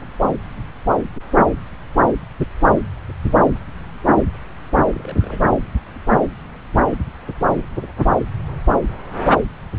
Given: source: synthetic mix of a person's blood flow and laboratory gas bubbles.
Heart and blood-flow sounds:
Doppler ultrasound of blood flow; subclavian vein
4.93-5.40 s: bubbles
5.46-5.50 s: bubbles
From the record:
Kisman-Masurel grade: 211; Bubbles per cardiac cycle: several, 3 to 8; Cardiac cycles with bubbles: 1 to 10%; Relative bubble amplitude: barely perceptible (0.100 to 0.250); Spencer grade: 1 (occasional bubble signal discernible with the cardiac motion signal, with majority of cardiac periods free of bubbles); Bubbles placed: anywhere in the cardiac cycle

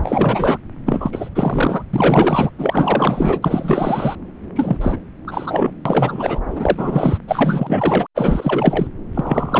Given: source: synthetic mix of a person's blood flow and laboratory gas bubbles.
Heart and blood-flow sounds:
Doppler ultrasound of blood flow; subclavian vein
0.00-0.57 s: bubbles
0.85-1.29 s: bubbles
1.34-1.83 s: bubbles
1.93-2.51 s: bubbles
2.58-4.16 s: bubbles
4.55-4.79 s: bubbles
4.81-4.98 s: bubbles
5.27-5.74 s: bubbles
5.85-6.41 s: bubbles
6.50-7.19 s: bubbles
7.28-8.07 s: bubbles
8.15-8.88 s: bubbles
9.14-9.60 s: bubbles
From the record:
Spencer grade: 4 (maximum detectable bubble signal sounding continuously throughout systole and diastole of every cardiac period, and overriding the amplitude of the normal cardiac signals); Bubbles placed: anywhere in the cardiac cycle

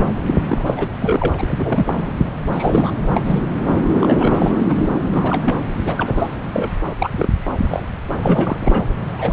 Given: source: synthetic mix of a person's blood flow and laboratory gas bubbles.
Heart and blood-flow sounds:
Doppler ultrasound of blood flow; subclavian vein
0.00-0.05 s: bubbles
0.27-0.36 s: bubbles
0.48-0.88 s: bubbles
1.01-1.35 s: bubbles
1.38-2.12 s: bubbles
2.51-2.91 s: bubbles
3.09-3.21 s: bubbles
3.23-3.44 s: bubbles
3.74-3.81 s: bubbles
3.92-4.62 s: bubbles
4.69-4.88 s: bubbles
5.11-5.64 s: bubbles
5.85-6.36 s: bubbles
6.53-6.71 s: bubbles
6.98-7.10 s: bubbles
7.12-7.29 s: bubbles
7.41-7.86 s: bubbles
8.17-8.88 s: bubbles
9.18-9.33 s: bubbles
From the record:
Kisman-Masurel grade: 342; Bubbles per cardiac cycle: rolling drumbeat, 9 or more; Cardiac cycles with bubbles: 100%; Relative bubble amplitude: moderate (0.250 to 0.450); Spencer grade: 3 (all of the cardiac periods contain showers or single bubble signals, but not dominating or overriding the cardiac motion signals); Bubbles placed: anywhere in the cardiac cycle

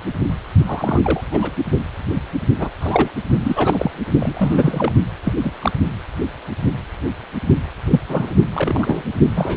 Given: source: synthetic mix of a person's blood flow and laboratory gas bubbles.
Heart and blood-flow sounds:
Doppler ultrasound of blood flow; precordium
0.66-1.21 s: bubbles
1.31-1.51 s: bubbles
2.58-2.69 s: bubbles
2.80-3.10 s: bubbles
3.40-3.91 s: bubbles
4.19-4.92 s: bubbles
5.24-5.33 s: bubbles
5.44-5.53 s: bubbles
5.59-5.71 s: bubbles
7.90-8.00 s: bubbles
8.08-8.35 s: bubbles
8.53-9.03 s: bubbles
9.36-9.57 s: bubbles
From the record:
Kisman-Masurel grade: 232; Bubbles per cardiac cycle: several, 3 to 8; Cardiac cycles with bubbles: 50 to 99%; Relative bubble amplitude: moderate (0.250 to 0.450); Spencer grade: 3 (all of the cardiac periods contain showers or single bubble signals, but not dominating or overriding the cardiac motion signals); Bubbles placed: only in the low amplitude regions of the cardiac cycle

